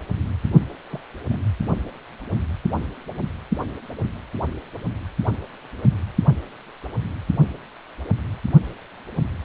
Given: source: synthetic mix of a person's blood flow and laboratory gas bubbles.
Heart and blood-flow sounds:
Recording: Doppler ultrasound of blood flow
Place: precordium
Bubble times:
0.91-1.00 s: bubbles
1.29-1.39 s: bubbles
From the record:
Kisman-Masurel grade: 111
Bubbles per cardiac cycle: 1 to 2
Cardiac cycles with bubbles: 1 to 10%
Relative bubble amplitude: barely perceptible (0.100 to 0.250)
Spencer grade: 1 (occasional bubble signal discernible with the cardiac motion signal, with majority of cardiac periods free of bubbles)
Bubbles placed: anywhere in the cardiac cycle

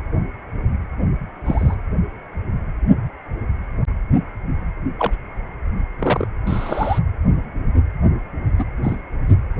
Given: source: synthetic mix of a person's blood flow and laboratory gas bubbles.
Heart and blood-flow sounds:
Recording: Doppler ultrasound of blood flow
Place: precordium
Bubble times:
1.45-1.75 s: bubbles
4.98-5.12 s: bubbles
5.99-6.27 s: bubbles
6.46-6.99 s: bubbles
8.58-8.65 s: bubbles
8.83-8.96 s: bubbles
9.29-9.35 s: bubbles
From the record:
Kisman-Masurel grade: 122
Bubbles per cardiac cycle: 1 to 2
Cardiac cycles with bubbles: 10 to 50%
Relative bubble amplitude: moderate (0.250 to 0.450)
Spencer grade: 2 (many but less than half of the cardiac periods contain bubble signals, singularly or in groups)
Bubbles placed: anywhere in the cardiac cycle

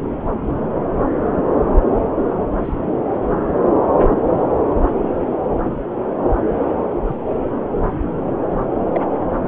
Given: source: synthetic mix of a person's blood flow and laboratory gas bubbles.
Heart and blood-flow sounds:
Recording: Doppler ultrasound of blood flow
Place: subclavian vein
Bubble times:
2.65-2.73 s: bubbles
7.06-7.17 s: bubbles
8.93-9.01 s: bubbles
9.20-9.25 s: bubbles
From the record:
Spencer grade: 2 (many but less than half of the cardiac periods contain bubble signals, singularly or in groups)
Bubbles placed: anywhere in the cardiac cycle

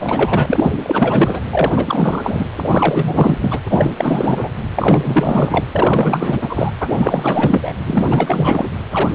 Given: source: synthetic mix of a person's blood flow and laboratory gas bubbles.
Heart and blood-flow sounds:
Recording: Doppler ultrasound of blood flow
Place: precordium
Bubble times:
0.00-0.72 s: bubbles
0.83-1.41 s: bubbles
1.50-1.72 s: bubbles
1.76-2.45 s: bubbles
2.56-3.38 s: bubbles
3.41-3.60 s: bubbles
3.69-3.91 s: bubbles
3.97-4.49 s: bubbles
4.76-5.65 s: bubbles
5.71-6.71 s: bubbles
6.81-6.90 s: bubbles
6.95-7.73 s: bubbles
7.86-8.71 s: bubbles
8.91-9.10 s: bubbles
From the record:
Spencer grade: 4 (maximum detectable bubble signal sounding continuously throughout systole and diastole of every cardiac period, and overriding the amplitude of the normal cardiac signals)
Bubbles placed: anywhere in the cardiac cycle

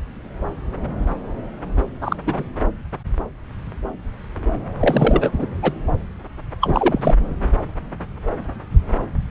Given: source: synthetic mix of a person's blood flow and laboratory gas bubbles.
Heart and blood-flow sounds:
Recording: Doppler ultrasound of blood flow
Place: subclavian vein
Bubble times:
2.01-2.16 s: bubbles
2.26-2.44 s: bubbles
4.79-5.47 s: bubbles
5.62-5.73 s: bubbles
6.61-7.14 s: bubbles
From the record:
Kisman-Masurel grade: 223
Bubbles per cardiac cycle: several, 3 to 8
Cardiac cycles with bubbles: 10 to 50%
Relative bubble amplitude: loud (0.450 to 0.775)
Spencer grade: 2 (many but less than half of the cardiac periods contain bubble signals, singularly or in groups)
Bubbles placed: anywhere in the cardiac cycle

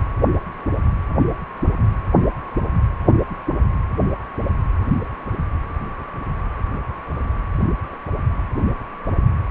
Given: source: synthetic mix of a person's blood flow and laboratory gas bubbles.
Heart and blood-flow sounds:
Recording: Doppler ultrasound of blood flow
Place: precordium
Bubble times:
no bubbles
From the record:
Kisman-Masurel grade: 000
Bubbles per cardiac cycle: 0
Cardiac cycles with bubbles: 0%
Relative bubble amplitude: no bubbles discernible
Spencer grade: 0 (complete lack of bubble signals)

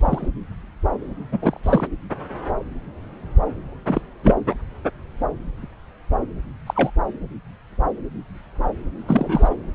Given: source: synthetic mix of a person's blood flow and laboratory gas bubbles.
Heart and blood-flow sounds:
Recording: Doppler ultrasound of blood flow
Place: subclavian vein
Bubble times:
0.01-0.28 s: bubbles
1.31-1.39 s: bubbles
1.42-1.60 s: bubbles
1.63-1.87 s: bubbles
3.87-4.01 s: bubbles
4.23-4.36 s: bubbles
4.50-4.55 s: bubbles
6.67-6.91 s: bubbles
9.07-9.56 s: bubbles
From the record:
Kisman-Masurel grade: 222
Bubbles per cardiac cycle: several, 3 to 8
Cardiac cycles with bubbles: 10 to 50%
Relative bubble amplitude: moderate (0.250 to 0.450)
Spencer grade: 2 (many but less than half of the cardiac periods contain bubble signals, singularly or in groups)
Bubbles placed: anywhere in the cardiac cycle

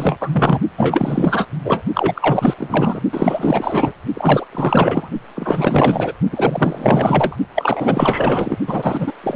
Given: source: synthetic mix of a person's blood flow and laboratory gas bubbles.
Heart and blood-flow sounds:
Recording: Doppler ultrasound of blood flow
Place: precordium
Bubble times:
0.00-0.17 s: bubbles
0.21-0.29 s: bubbles
0.34-0.60 s: bubbles
0.77-1.46 s: bubbles
1.65-1.82 s: bubbles
1.95-2.54 s: bubbles
2.58-3.01 s: bubbles
3.12-3.92 s: bubbles
4.13-4.47 s: bubbles
4.51-5.09 s: bubbles
5.35-6.12 s: bubbles
6.31-7.37 s: bubbles
7.55-8.59 s: bubbles
8.67-9.14 s: bubbles
9.23-9.36 s: bubbles
From the record:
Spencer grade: 4 (maximum detectable bubble signal sounding continuously throughout systole and diastole of every cardiac period, and overriding the amplitude of the normal cardiac signals)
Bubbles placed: only in the low amplitude regions of the cardiac cycle

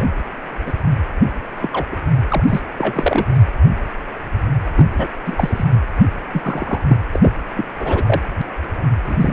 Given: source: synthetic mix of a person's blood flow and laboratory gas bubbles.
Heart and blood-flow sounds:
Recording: Doppler ultrasound of blood flow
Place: precordium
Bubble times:
0.00-0.08 s: bubbles
0.66-0.73 s: bubbles
1.62-1.70 s: bubbles
1.73-1.87 s: bubbles
1.92-1.96 s: bubbles
2.29-2.44 s: bubbles
2.48-2.62 s: bubbles
2.77-3.44 s: bubbles
4.75-4.86 s: bubbles
4.97-5.08 s: bubbles
5.26-5.65 s: bubbles
5.73-5.79 s: bubbles
6.33-6.81 s: bubbles
6.88-6.97 s: bubbles
7.12-7.32 s: bubbles
7.56-7.66 s: bubbles
7.72-8.30 s: bubbles
9.04-9.33 s: bubbles
From the record:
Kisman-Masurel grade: 233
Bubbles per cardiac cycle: several, 3 to 8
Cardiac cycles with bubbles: 50 to 99%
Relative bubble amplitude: loud (0.450 to 0.775)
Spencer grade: 3 (all of the cardiac periods contain showers or single bubble signals, but not dominating or overriding the cardiac motion signals)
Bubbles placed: anywhere in the cardiac cycle

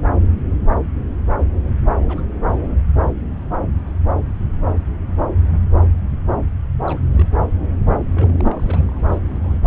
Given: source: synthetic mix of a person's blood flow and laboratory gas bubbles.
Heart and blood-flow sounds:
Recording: Doppler ultrasound of blood flow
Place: subclavian vein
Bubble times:
2.08-2.25 s: bubbles
2.47-2.57 s: bubbles
6.82-6.99 s: bubbles
7.02-7.09 s: bubbles
7.13-7.28 s: bubbles
8.14-8.41 s: bubbles
8.44-9.04 s: bubbles
9.07-9.58 s: bubbles
From the record:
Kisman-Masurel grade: 221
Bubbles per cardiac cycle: several, 3 to 8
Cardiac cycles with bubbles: 10 to 50%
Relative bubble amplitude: barely perceptible (0.100 to 0.250)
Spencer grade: 2 (many but less than half of the cardiac periods contain bubble signals, singularly or in groups)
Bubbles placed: anywhere in the cardiac cycle

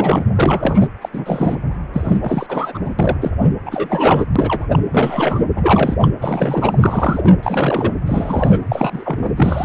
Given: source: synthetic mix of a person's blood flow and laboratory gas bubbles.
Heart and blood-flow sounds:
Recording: Doppler ultrasound of blood flow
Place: precordium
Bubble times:
0.00-0.25 s: bubbles
0.35-0.88 s: bubbles
1.01-1.09 s: bubbles
1.13-1.59 s: bubbles
1.93-2.79 s: bubbles
2.83-2.93 s: bubbles
2.99-3.18 s: bubbles
3.21-3.32 s: bubbles
3.66-4.25 s: bubbles
4.36-4.67 s: bubbles
4.69-4.79 s: bubbles
4.91-5.45 s: bubbles
5.56-5.96 s: bubbles
6.02-6.08 s: bubbles
6.20-7.93 s: bubbles
8.06-8.59 s: bubbles
8.69-9.30 s: bubbles
9.36-9.65 s: bubbles
From the record:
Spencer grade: 3 (all of the cardiac periods contain showers or single bubble signals, but not dominating or overriding the cardiac motion signals)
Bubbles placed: anywhere in the cardiac cycle

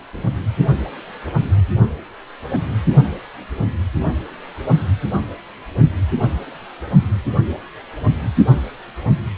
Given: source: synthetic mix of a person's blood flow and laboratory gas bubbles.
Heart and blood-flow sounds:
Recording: Doppler ultrasound of blood flow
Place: precordium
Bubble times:
0.13-0.31 s: bubbles
From the record:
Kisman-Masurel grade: 211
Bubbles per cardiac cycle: several, 3 to 8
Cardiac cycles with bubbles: 1 to 10%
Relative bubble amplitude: barely perceptible (0.100 to 0.250)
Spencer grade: 1 (occasional bubble signal discernible with the cardiac motion signal, with majority of cardiac periods free of bubbles)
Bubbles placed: anywhere in the cardiac cycle

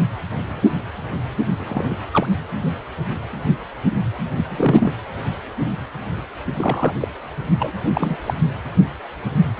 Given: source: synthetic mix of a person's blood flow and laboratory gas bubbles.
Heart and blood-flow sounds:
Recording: Doppler ultrasound of blood flow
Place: precordium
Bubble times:
1.58-1.94 s: bubbles
2.12-2.26 s: bubbles
4.36-4.92 s: bubbles
6.56-7.08 s: bubbles
7.59-7.71 s: bubbles
7.84-8.17 s: bubbles
8.25-8.34 s: bubbles
9.57-9.60 s: bubbles
From the record:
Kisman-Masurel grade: 232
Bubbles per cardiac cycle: several, 3 to 8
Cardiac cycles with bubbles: 50 to 99%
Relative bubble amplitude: moderate (0.250 to 0.450)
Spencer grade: 3 (all of the cardiac periods contain showers or single bubble signals, but not dominating or overriding the cardiac motion signals)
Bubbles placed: anywhere in the cardiac cycle

